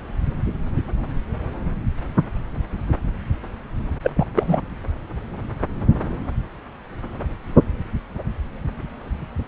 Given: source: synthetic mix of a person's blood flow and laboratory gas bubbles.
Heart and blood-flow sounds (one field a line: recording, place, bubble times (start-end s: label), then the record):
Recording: Doppler ultrasound of blood flow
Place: subclavian vein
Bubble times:
4.03-4.11 s: bubbles
4.15-4.25 s: bubbles
4.35-4.61 s: bubbles
From the record:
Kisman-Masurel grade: 213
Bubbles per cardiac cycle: several, 3 to 8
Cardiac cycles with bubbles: 1 to 10%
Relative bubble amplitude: loud (0.450 to 0.775)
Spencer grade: 1 (occasional bubble signal discernible with the cardiac motion signal, with majority of cardiac periods free of bubbles)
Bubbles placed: anywhere in the cardiac cycle